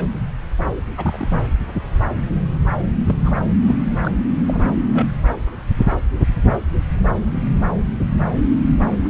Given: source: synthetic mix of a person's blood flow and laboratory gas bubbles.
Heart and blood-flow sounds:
Doppler ultrasound of blood flow; subclavian vein
0.00-0.05 s: bubbles
0.97-1.41 s: bubbles
3.06-3.16 s: bubbles
3.25-3.32 s: bubbles
3.67-3.75 s: bubbles
4.03-4.11 s: bubbles
4.46-4.76 s: bubbles
4.93-5.07 s: bubbles
8.88-8.97 s: bubbles
From the record:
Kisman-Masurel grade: 122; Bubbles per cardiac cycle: 1 to 2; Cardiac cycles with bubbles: 10 to 50%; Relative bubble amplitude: moderate (0.250 to 0.450); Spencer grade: 2 (many but less than half of the cardiac periods contain bubble signals, singularly or in groups); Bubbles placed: anywhere in the cardiac cycle

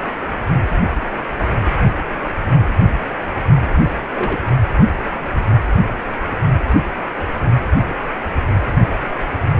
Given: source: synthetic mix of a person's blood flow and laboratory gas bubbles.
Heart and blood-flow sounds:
Doppler ultrasound of blood flow; precordium
3.64-3.83 s: bubbles
4.14-4.39 s: bubbles
From the record:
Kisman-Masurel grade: 112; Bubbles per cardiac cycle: 1 to 2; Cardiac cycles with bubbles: 1 to 10%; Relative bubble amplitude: moderate (0.250 to 0.450); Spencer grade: 1 (occasional bubble signal discernible with the cardiac motion signal, with majority of cardiac periods free of bubbles); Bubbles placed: only in the low amplitude regions of the cardiac cycle

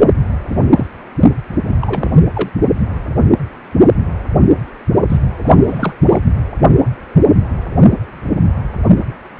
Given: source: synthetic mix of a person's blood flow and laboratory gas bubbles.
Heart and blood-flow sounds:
Doppler ultrasound of blood flow; precordium
0.49-0.57 s: bubbles
0.76-0.86 s: bubbles
1.67-2.11 s: bubbles
2.33-2.49 s: bubbles
5.09-5.19 s: bubbles
5.38-5.94 s: bubbles
6.08-6.21 s: bubbles
From the record:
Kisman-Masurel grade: 222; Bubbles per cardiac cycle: several, 3 to 8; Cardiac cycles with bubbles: 10 to 50%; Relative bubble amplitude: moderate (0.250 to 0.450); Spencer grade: 2 (many but less than half of the cardiac periods contain bubble signals, singularly or in groups); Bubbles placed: only in the low amplitude regions of the cardiac cycle

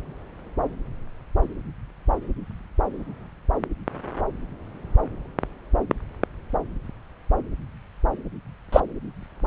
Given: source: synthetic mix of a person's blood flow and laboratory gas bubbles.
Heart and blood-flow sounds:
Doppler ultrasound of blood flow; subclavian vein
8.72-8.80 s: bubbles
From the record:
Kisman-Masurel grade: 113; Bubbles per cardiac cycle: 1 to 2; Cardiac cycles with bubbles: 1 to 10%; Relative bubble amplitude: loud (0.450 to 0.775); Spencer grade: 1 (occasional bubble signal discernible with the cardiac motion signal, with majority of cardiac periods free of bubbles); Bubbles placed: anywhere in the cardiac cycle

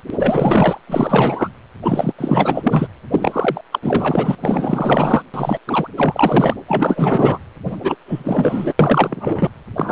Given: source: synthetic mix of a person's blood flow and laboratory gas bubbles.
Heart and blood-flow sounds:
Doppler ultrasound of blood flow; precordium
0.07-0.81 s: bubbles
0.87-1.48 s: bubbles
1.82-2.12 s: bubbles
2.18-2.88 s: bubbles
3.11-3.61 s: bubbles
3.71-3.79 s: bubbles
3.82-4.35 s: bubbles
4.42-5.24 s: bubbles
5.33-5.58 s: bubbles
5.66-5.88 s: bubbles
5.96-6.54 s: bubbles
6.68-7.38 s: bubbles
7.65-7.97 s: bubbles
8.06-8.73 s: bubbles
8.79-9.50 s: bubbles
9.76-9.92 s: bubbles
From the record:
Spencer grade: 4 (maximum detectable bubble signal sounding continuously throughout systole and diastole of every cardiac period, and overriding the amplitude of the normal cardiac signals); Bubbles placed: anywhere in the cardiac cycle

